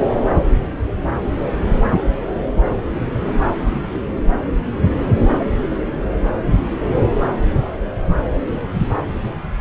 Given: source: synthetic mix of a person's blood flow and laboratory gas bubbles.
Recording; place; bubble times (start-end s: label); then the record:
Doppler ultrasound of blood flow; subclavian vein
no bubbles
From the record:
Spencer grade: 0 (complete lack of bubble signals)